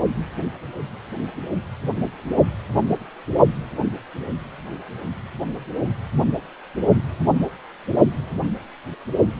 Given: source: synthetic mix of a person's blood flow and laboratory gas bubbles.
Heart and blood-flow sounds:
Doppler ultrasound of blood flow; precordium
no bubbles
From the record:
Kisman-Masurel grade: 000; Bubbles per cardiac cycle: 0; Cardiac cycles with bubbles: 0%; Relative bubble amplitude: no bubbles discernible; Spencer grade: 0 (complete lack of bubble signals)

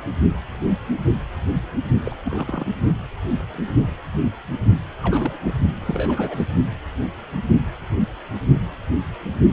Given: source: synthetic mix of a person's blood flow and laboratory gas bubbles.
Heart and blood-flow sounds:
Doppler ultrasound of blood flow; precordium
2.04-2.17 s: bubbles
2.25-2.67 s: bubbles
5.01-5.38 s: bubbles
5.44-5.58 s: bubbles
5.80-6.46 s: bubbles
From the record:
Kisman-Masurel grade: 221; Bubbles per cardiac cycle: several, 3 to 8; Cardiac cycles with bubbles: 10 to 50%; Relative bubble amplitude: barely perceptible (0.100 to 0.250); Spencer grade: 2 (many but less than half of the cardiac periods contain bubble signals, singularly or in groups); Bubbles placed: only in the low amplitude regions of the cardiac cycle

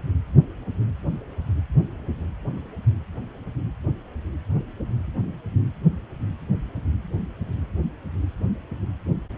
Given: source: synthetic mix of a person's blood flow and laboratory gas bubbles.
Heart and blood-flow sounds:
Doppler ultrasound of blood flow; precordium
no bubbles
From the record:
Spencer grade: 0 (complete lack of bubble signals)

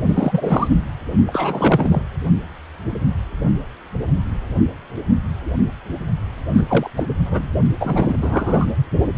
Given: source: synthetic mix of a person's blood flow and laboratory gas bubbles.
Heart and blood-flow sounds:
Doppler ultrasound of blood flow; precordium
0.06-0.78 s: bubbles
1.26-2.03 s: bubbles
6.54-6.65 s: bubbles
6.69-6.90 s: bubbles
6.96-7.04 s: bubbles
7.25-7.49 s: bubbles
7.80-8.17 s: bubbles
8.21-8.71 s: bubbles
From the record:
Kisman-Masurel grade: 233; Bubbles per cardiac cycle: several, 3 to 8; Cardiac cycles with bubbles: 50 to 99%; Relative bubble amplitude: loud (0.450 to 0.775); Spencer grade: 3 (all of the cardiac periods contain showers or single bubble signals, but not dominating or overriding the cardiac motion signals); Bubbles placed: only in the low amplitude regions of the cardiac cycle

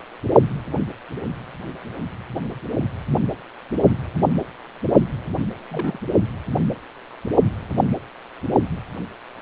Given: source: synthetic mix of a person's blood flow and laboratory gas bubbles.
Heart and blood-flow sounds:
Doppler ultrasound of blood flow; precordium
5.71-5.99 s: bubbles
From the record:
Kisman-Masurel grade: 221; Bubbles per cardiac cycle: several, 3 to 8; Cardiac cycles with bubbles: 10 to 50%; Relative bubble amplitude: barely perceptible (0.100 to 0.250); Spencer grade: 2 (many but less than half of the cardiac periods contain bubble signals, singularly or in groups); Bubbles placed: only in the low amplitude regions of the cardiac cycle

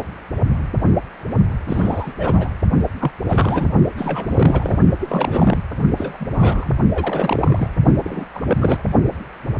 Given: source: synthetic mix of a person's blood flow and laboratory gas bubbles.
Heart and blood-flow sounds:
Doppler ultrasound of blood flow; precordium
1.68-2.14 s: bubbles
2.18-2.50 s: bubbles
3.00-3.12 s: bubbles
3.29-3.67 s: bubbles
3.97-4.79 s: bubbles
4.99-5.62 s: bubbles
5.96-6.17 s: bubbles
6.19-6.25 s: bubbles
6.29-6.78 s: bubbles
6.93-7.68 s: bubbles
8.04-8.25 s: bubbles
8.33-8.83 s: bubbles
From the record:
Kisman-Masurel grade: 332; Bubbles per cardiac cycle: rolling drumbeat, 9 or more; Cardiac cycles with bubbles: 50 to 99%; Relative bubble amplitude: moderate (0.250 to 0.450); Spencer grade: 3 (all of the cardiac periods contain showers or single bubble signals, but not dominating or overriding the cardiac motion signals); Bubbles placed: only in the low amplitude regions of the cardiac cycle

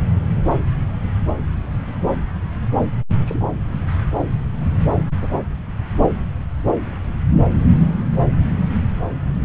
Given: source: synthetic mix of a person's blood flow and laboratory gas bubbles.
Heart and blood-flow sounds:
Doppler ultrasound of blood flow; subclavian vein
3.25-3.40 s: bubbles
From the record:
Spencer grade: 1 (occasional bubble signal discernible with the cardiac motion signal, with majority of cardiac periods free of bubbles); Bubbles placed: anywhere in the cardiac cycle

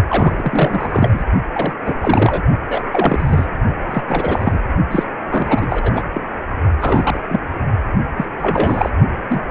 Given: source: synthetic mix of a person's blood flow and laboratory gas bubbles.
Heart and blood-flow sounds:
Doppler ultrasound of blood flow; precordium
0.08-1.24 s: bubbles
1.53-1.75 s: bubbles
1.85-1.94 s: bubbles
2.00-2.42 s: bubbles
2.65-2.90 s: bubbles
2.92-3.48 s: bubbles
3.86-4.03 s: bubbles
4.08-4.61 s: bubbles
4.91-5.04 s: bubbles
5.29-6.03 s: bubbles
6.13-6.21 s: bubbles
6.79-7.21 s: bubbles
7.30-7.41 s: bubbles
8.16-8.25 s: bubbles
8.36-8.90 s: bubbles
9.28-9.40 s: bubbles
From the record:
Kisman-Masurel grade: 343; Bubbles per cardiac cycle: rolling drumbeat, 9 or more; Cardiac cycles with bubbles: 100%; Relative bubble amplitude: loud (0.450 to 0.775); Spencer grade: 3 (all of the cardiac periods contain showers or single bubble signals, but not dominating or overriding the cardiac motion signals); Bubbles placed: only in the low amplitude regions of the cardiac cycle

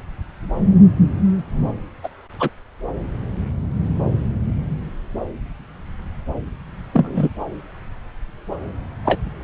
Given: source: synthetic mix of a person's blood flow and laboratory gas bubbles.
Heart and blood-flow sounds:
Doppler ultrasound of blood flow; subclavian vein
2.03-2.08 s: bubbles
2.40-2.50 s: bubbles
6.93-7.29 s: bubbles
9.05-9.20 s: bubbles
From the record:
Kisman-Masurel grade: 123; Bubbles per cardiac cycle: 1 to 2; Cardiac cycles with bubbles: 10 to 50%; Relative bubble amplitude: loud (0.450 to 0.775); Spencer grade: 2 (many but less than half of the cardiac periods contain bubble signals, singularly or in groups); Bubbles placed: anywhere in the cardiac cycle

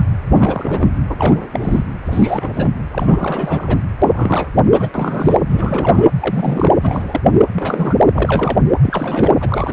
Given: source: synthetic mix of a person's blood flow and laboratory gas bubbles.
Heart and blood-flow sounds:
Doppler ultrasound of blood flow; precordium
0.00-0.04 s: bubbles
0.29-0.98 s: bubbles
1.09-1.15 s: bubbles
1.18-1.42 s: bubbles
1.53-1.82 s: bubbles
2.04-2.72 s: bubbles
2.92-3.83 s: bubbles
4.01-4.50 s: bubbles
4.64-4.89 s: bubbles
4.94-5.40 s: bubbles
5.49-6.08 s: bubbles
6.19-6.73 s: bubbles
6.81-7.21 s: bubbles
7.24-7.32 s: bubbles
7.52-7.95 s: bubbles
8.12-8.58 s: bubbles
8.83-9.73 s: bubbles
From the record:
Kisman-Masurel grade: 342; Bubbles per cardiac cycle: rolling drumbeat, 9 or more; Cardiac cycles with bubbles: 100%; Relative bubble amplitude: moderate (0.250 to 0.450); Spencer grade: 3 (all of the cardiac periods contain showers or single bubble signals, but not dominating or overriding the cardiac motion signals); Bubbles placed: anywhere in the cardiac cycle

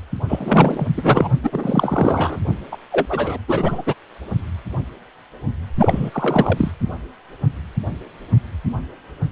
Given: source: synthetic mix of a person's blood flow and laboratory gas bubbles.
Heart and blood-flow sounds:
Doppler ultrasound of blood flow; precordium
0.28-0.86 s: bubbles
0.97-1.28 s: bubbles
1.43-2.38 s: bubbles
2.71-2.77 s: bubbles
2.92-3.38 s: bubbles
3.47-3.82 s: bubbles
3.86-3.94 s: bubbles
5.78-6.71 s: bubbles
From the record:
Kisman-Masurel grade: 223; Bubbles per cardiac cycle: several, 3 to 8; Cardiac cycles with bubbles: 10 to 50%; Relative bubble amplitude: loud (0.450 to 0.775); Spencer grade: 2 (many but less than half of the cardiac periods contain bubble signals, singularly or in groups); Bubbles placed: only in the low amplitude regions of the cardiac cycle

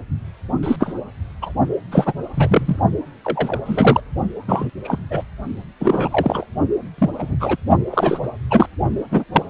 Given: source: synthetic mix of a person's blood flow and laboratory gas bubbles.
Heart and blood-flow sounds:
Doppler ultrasound of blood flow; precordium
0.62-0.76 s: bubbles
0.80-0.94 s: bubbles
1.42-1.52 s: bubbles
1.91-2.13 s: bubbles
2.34-2.76 s: bubbles
3.25-3.58 s: bubbles
3.66-4.00 s: bubbles
4.47-4.70 s: bubbles
4.83-4.99 s: bubbles
5.10-5.24 s: bubbles
5.80-6.46 s: bubbles
6.98-7.10 s: bubbles
7.19-7.35 s: bubbles
7.39-7.56 s: bubbles
7.91-8.30 s: bubbles
8.51-8.67 s: bubbles
9.11-9.24 s: bubbles
9.33-9.43 s: bubbles
From the record:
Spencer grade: 3 (all of the cardiac periods contain showers or single bubble signals, but not dominating or overriding the cardiac motion signals); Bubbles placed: only in the low amplitude regions of the cardiac cycle

